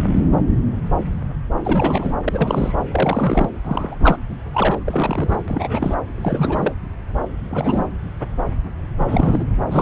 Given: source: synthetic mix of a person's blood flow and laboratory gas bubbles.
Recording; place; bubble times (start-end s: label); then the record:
Doppler ultrasound of blood flow; subclavian vein
1.62-2.16 s: bubbles
2.24-2.83 s: bubbles
2.92-3.50 s: bubbles
3.65-3.96 s: bubbles
4.00-4.17 s: bubbles
4.53-4.79 s: bubbles
4.84-5.37 s: bubbles
5.48-5.95 s: bubbles
6.05-6.74 s: bubbles
7.50-7.86 s: bubbles
8.99-9.46 s: bubbles
9.67-9.82 s: bubbles
From the record:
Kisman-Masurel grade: 332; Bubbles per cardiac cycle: rolling drumbeat, 9 or more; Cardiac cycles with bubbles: 50 to 99%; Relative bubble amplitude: moderate (0.250 to 0.450); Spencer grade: 3 (all of the cardiac periods contain showers or single bubble signals, but not dominating or overriding the cardiac motion signals); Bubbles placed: anywhere in the cardiac cycle